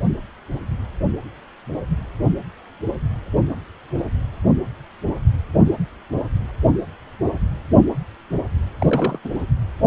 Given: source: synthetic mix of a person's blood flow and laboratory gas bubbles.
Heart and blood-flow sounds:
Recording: Doppler ultrasound of blood flow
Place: precordium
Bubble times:
8.79-9.19 s: bubbles
9.25-9.30 s: bubbles
From the record:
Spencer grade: 2 (many but less than half of the cardiac periods contain bubble signals, singularly or in groups)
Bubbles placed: anywhere in the cardiac cycle

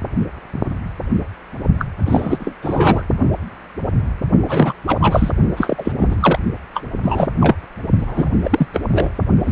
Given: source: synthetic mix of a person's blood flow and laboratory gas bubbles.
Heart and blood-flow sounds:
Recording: Doppler ultrasound of blood flow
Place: precordium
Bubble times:
1.78-1.85 s: bubbles
2.05-2.53 s: bubbles
2.62-3.03 s: bubbles
4.47-4.73 s: bubbles
4.87-5.31 s: bubbles
5.56-5.92 s: bubbles
5.99-6.16 s: bubbles
6.20-6.39 s: bubbles
6.73-6.83 s: bubbles
7.03-7.28 s: bubbles
7.40-7.55 s: bubbles
7.99-8.29 s: bubbles
8.44-8.67 s: bubbles
8.73-8.80 s: bubbles
8.91-9.10 s: bubbles
9.44-9.51 s: bubbles
From the record:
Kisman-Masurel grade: 333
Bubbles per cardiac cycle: rolling drumbeat, 9 or more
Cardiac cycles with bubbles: 50 to 99%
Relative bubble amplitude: loud (0.450 to 0.775)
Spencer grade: 3 (all of the cardiac periods contain showers or single bubble signals, but not dominating or overriding the cardiac motion signals)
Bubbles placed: only in the low amplitude regions of the cardiac cycle

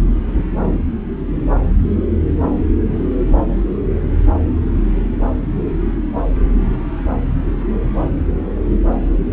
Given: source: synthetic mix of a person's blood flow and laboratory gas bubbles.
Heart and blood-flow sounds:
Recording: Doppler ultrasound of blood flow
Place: subclavian vein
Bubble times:
no bubbles
From the record:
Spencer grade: 0 (complete lack of bubble signals)

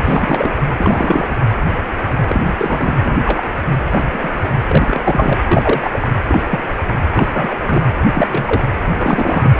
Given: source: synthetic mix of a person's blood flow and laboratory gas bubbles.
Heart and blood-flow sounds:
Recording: Doppler ultrasound of blood flow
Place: precordium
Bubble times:
0.02-0.51 s: bubbles
0.77-1.26 s: bubbles
2.27-2.55 s: bubbles
2.58-3.00 s: bubbles
3.03-3.46 s: bubbles
3.90-4.31 s: bubbles
4.64-5.40 s: bubbles
5.51-5.90 s: bubbles
5.93-6.08 s: bubbles
6.28-6.42 s: bubbles
6.50-6.60 s: bubbles
7.14-7.29 s: bubbles
7.32-7.57 s: bubbles
7.66-7.83 s: bubbles
8.14-8.64 s: bubbles
8.97-9.51 s: bubbles
From the record:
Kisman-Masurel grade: 233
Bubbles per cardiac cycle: several, 3 to 8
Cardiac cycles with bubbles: 50 to 99%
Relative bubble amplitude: loud (0.450 to 0.775)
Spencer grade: 3 (all of the cardiac periods contain showers or single bubble signals, but not dominating or overriding the cardiac motion signals)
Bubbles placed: anywhere in the cardiac cycle

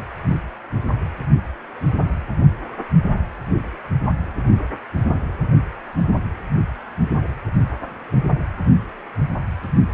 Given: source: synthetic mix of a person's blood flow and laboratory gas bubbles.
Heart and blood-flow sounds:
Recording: Doppler ultrasound of blood flow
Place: precordium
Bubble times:
no bubbles
From the record:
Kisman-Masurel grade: 000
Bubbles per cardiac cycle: 0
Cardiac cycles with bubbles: 0%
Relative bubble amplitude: no bubbles discernible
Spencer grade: 0 (complete lack of bubble signals)

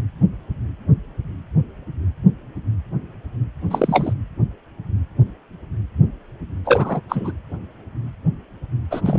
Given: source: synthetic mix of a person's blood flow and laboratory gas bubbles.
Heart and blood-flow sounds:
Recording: Doppler ultrasound of blood flow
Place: precordium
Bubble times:
3.70-4.13 s: bubbles
6.65-7.02 s: bubbles
7.09-7.32 s: bubbles
8.91-9.01 s: bubbles
9.04-9.19 s: bubbles
From the record:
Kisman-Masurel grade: 223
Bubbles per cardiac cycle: several, 3 to 8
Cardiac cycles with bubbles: 10 to 50%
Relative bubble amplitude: loud (0.450 to 0.775)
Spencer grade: 2 (many but less than half of the cardiac periods contain bubble signals, singularly or in groups)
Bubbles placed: anywhere in the cardiac cycle

